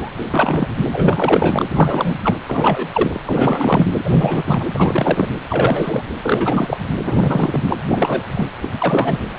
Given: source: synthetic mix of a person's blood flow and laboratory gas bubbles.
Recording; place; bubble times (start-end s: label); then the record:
Doppler ultrasound of blood flow; precordium
0.00-0.12 s: bubbles
0.34-0.68 s: bubbles
0.93-1.64 s: bubbles
1.70-2.19 s: bubbles
2.22-2.36 s: bubbles
2.46-2.88 s: bubbles
2.92-3.19 s: bubbles
3.25-3.93 s: bubbles
4.04-4.43 s: bubbles
4.46-4.65 s: bubbles
4.74-5.27 s: bubbles
5.49-6.02 s: bubbles
6.22-6.77 s: bubbles
7.05-7.63 s: bubbles
7.68-7.77 s: bubbles
7.88-8.23 s: bubbles
8.34-8.47 s: bubbles
8.62-8.68 s: bubbles
8.78-9.19 s: bubbles
From the record:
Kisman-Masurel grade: 343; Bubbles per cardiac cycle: rolling drumbeat, 9 or more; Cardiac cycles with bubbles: 100%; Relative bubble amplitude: loud (0.450 to 0.775); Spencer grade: 3 (all of the cardiac periods contain showers or single bubble signals, but not dominating or overriding the cardiac motion signals); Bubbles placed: anywhere in the cardiac cycle